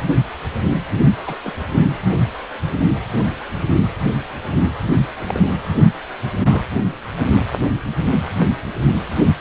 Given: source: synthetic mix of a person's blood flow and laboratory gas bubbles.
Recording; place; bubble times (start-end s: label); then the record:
Doppler ultrasound of blood flow; precordium
1.17-1.36 s: bubbles
1.45-1.53 s: bubbles
5.16-5.56 s: bubbles
6.42-6.68 s: bubbles
From the record:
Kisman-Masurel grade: 121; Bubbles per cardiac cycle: 1 to 2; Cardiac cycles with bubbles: 10 to 50%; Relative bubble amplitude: barely perceptible (0.100 to 0.250); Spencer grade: 2 (many but less than half of the cardiac periods contain bubble signals, singularly or in groups); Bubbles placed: anywhere in the cardiac cycle